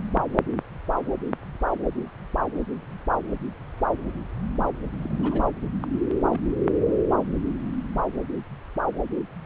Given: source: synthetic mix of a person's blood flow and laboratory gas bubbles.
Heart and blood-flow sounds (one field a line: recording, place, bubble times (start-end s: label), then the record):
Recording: Doppler ultrasound of blood flow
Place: subclavian vein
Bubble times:
4.99-5.49 s: bubbles
5.82-5.87 s: bubbles
6.31-6.39 s: bubbles
From the record:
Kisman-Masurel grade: 211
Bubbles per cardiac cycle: several, 3 to 8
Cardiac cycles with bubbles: 1 to 10%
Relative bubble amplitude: barely perceptible (0.100 to 0.250)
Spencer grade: 1 (occasional bubble signal discernible with the cardiac motion signal, with majority of cardiac periods free of bubbles)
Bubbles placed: anywhere in the cardiac cycle